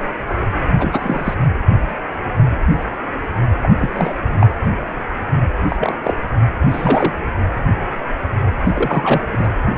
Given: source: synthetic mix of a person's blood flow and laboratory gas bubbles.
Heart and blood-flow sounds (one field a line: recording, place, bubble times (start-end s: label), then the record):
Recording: Doppler ultrasound of blood flow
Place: precordium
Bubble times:
0.79-1.34 s: bubbles
3.61-3.69 s: bubbles
3.78-3.91 s: bubbles
3.93-4.14 s: bubbles
4.18-4.55 s: bubbles
5.68-5.95 s: bubbles
6.03-6.14 s: bubbles
6.68-7.13 s: bubbles
8.64-9.28 s: bubbles
9.32-9.50 s: bubbles
From the record:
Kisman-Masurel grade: 222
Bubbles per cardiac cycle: several, 3 to 8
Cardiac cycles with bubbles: 10 to 50%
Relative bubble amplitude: moderate (0.250 to 0.450)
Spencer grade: 2 (many but less than half of the cardiac periods contain bubble signals, singularly or in groups)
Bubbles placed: anywhere in the cardiac cycle